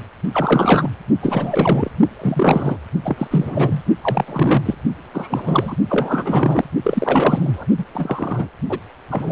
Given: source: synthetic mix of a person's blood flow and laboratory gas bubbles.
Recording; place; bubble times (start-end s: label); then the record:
Doppler ultrasound of blood flow; precordium
0.33-0.90 s: bubbles
1.21-1.91 s: bubbles
2.22-2.77 s: bubbles
3.05-3.27 s: bubbles
3.31-3.83 s: bubbles
4.02-4.75 s: bubbles
5.13-5.76 s: bubbles
5.87-6.65 s: bubbles
6.83-7.67 s: bubbles
7.77-7.84 s: bubbles
7.94-8.47 s: bubbles
8.68-8.79 s: bubbles
9.10-9.32 s: bubbles
From the record:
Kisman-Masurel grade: 343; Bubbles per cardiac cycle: rolling drumbeat, 9 or more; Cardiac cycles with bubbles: 100%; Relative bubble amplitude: loud (0.450 to 0.775); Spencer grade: 3 (all of the cardiac periods contain showers or single bubble signals, but not dominating or overriding the cardiac motion signals); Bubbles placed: only in the low amplitude regions of the cardiac cycle